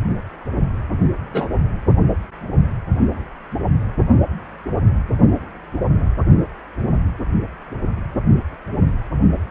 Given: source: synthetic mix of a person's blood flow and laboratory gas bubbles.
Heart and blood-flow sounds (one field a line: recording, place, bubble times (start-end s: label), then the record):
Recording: Doppler ultrasound of blood flow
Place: precordium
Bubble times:
1.33-1.48 s: bubbles
From the record:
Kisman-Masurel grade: 113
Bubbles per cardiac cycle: 1 to 2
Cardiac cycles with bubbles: 1 to 10%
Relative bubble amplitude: loud (0.450 to 0.775)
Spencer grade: 1 (occasional bubble signal discernible with the cardiac motion signal, with majority of cardiac periods free of bubbles)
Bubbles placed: only in the low amplitude regions of the cardiac cycle